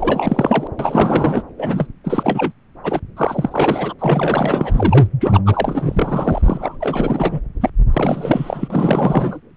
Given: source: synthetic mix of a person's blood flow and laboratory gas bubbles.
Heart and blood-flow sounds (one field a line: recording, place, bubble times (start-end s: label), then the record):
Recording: Doppler ultrasound of blood flow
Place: subclavian vein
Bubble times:
0.00-0.68 s: bubbles
0.79-1.43 s: bubbles
1.58-1.88 s: bubbles
2.04-2.52 s: bubbles
2.83-3.00 s: bubbles
3.17-3.94 s: bubbles
3.99-5.07 s: bubbles
5.20-5.42 s: bubbles
5.46-6.78 s: bubbles
6.80-7.41 s: bubbles
7.61-7.70 s: bubbles
7.93-9.40 s: bubbles
From the record:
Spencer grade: 4 (maximum detectable bubble signal sounding continuously throughout systole and diastole of every cardiac period, and overriding the amplitude of the normal cardiac signals)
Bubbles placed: anywhere in the cardiac cycle